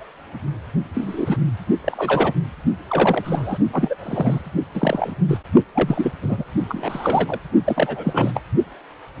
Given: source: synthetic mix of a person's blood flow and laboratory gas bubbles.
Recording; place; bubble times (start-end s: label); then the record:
Doppler ultrasound of blood flow; precordium
0.94-1.37 s: bubbles
1.84-2.33 s: bubbles
2.88-3.58 s: bubbles
3.73-3.95 s: bubbles
3.98-4.42 s: bubbles
4.74-5.15 s: bubbles
5.28-5.38 s: bubbles
5.74-6.12 s: bubbles
6.22-6.45 s: bubbles
6.69-7.40 s: bubbles
7.64-8.31 s: bubbles
8.34-8.41 s: bubbles
From the record:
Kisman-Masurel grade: 232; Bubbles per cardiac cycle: several, 3 to 8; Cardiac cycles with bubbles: 50 to 99%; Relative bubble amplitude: moderate (0.250 to 0.450); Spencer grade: 3 (all of the cardiac periods contain showers or single bubble signals, but not dominating or overriding the cardiac motion signals); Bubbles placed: only in the low amplitude regions of the cardiac cycle